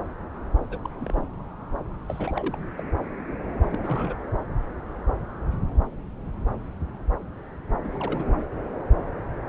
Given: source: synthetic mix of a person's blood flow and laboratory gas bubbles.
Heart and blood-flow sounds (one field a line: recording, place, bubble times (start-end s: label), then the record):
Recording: Doppler ultrasound of blood flow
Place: subclavian vein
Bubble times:
0.69-0.77 s: bubbles
0.82-0.89 s: bubbles
0.94-1.23 s: bubbles
2.06-2.60 s: bubbles
2.77-2.83 s: bubbles
3.63-4.16 s: bubbles
7.83-8.30 s: bubbles
From the record:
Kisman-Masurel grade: 221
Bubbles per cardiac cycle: several, 3 to 8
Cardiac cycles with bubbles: 10 to 50%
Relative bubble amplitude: barely perceptible (0.100 to 0.250)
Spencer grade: 2 (many but less than half of the cardiac periods contain bubble signals, singularly or in groups)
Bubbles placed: anywhere in the cardiac cycle